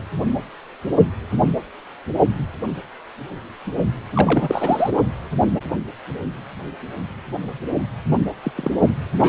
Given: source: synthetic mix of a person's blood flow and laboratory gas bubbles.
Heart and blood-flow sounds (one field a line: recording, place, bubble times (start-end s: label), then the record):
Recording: Doppler ultrasound of blood flow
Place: precordium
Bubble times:
4.13-4.90 s: bubbles
8.43-8.51 s: bubbles
8.55-8.71 s: bubbles
8.82-8.88 s: bubbles
9.17-9.28 s: bubbles
From the record:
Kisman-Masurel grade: 222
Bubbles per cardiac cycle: several, 3 to 8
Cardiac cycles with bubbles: 10 to 50%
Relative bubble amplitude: moderate (0.250 to 0.450)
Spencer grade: 2 (many but less than half of the cardiac periods contain bubble signals, singularly or in groups)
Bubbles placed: only in the low amplitude regions of the cardiac cycle